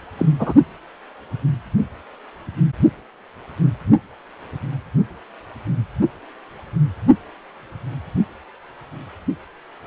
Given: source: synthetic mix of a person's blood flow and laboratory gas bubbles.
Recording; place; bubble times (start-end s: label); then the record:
Doppler ultrasound of blood flow; precordium
0.17-0.26 s: bubbles
0.39-0.53 s: bubbles
From the record:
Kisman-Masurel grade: 222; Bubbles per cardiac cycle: several, 3 to 8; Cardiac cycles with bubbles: 10 to 50%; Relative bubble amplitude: moderate (0.250 to 0.450); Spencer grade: 2 (many but less than half of the cardiac periods contain bubble signals, singularly or in groups); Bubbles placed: only in the low amplitude regions of the cardiac cycle